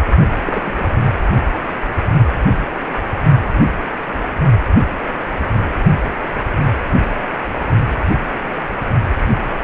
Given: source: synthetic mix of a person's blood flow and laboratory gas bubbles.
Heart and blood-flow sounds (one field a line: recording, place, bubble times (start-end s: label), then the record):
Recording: Doppler ultrasound of blood flow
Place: precordium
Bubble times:
0.45-0.89 s: bubbles
From the record:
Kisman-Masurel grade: 222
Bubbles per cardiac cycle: several, 3 to 8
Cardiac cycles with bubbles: 10 to 50%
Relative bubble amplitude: moderate (0.250 to 0.450)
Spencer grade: 2 (many but less than half of the cardiac periods contain bubble signals, singularly or in groups)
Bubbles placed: only in the low amplitude regions of the cardiac cycle